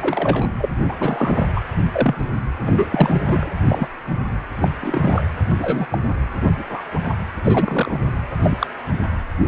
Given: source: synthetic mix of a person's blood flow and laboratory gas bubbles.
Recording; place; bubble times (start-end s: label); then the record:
Doppler ultrasound of blood flow; precordium
0.01-0.46 s: bubbles
0.58-0.69 s: bubbles
0.84-0.95 s: bubbles
0.98-1.47 s: bubbles
1.54-1.60 s: bubbles
1.92-2.15 s: bubbles
2.18-2.25 s: bubbles
2.62-3.52 s: bubbles
3.65-3.88 s: bubbles
4.61-4.69 s: bubbles
4.81-5.28 s: bubbles
5.49-5.87 s: bubbles
5.90-5.98 s: bubbles
6.59-6.63 s: bubbles
6.69-6.81 s: bubbles
6.93-7.15 s: bubbles
7.44-7.99 s: bubbles
8.42-8.67 s: bubbles
9.42-9.48 s: bubbles
From the record:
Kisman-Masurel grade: 242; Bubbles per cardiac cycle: several, 3 to 8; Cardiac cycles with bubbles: 100%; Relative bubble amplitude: moderate (0.250 to 0.450); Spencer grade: 3 (all of the cardiac periods contain showers or single bubble signals, but not dominating or overriding the cardiac motion signals); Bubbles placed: anywhere in the cardiac cycle